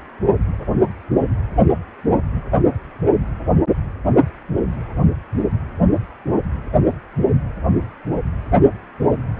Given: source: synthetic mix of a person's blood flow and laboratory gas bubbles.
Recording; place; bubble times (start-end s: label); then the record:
Doppler ultrasound of blood flow; precordium
no bubbles
From the record:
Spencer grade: 0 (complete lack of bubble signals)